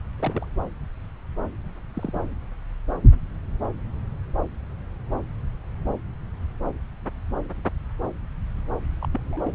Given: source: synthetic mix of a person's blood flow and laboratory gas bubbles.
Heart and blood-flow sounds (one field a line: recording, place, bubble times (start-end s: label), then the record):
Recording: Doppler ultrasound of blood flow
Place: subclavian vein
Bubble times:
0.19-0.45 s: bubbles
1.94-2.21 s: bubbles
9.01-9.09 s: bubbles
9.12-9.21 s: bubbles
9.23-9.55 s: bubbles
From the record:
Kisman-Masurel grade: 121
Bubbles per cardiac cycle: 1 to 2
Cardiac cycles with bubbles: 10 to 50%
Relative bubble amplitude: barely perceptible (0.100 to 0.250)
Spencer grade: 2 (many but less than half of the cardiac periods contain bubble signals, singularly or in groups)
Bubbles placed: anywhere in the cardiac cycle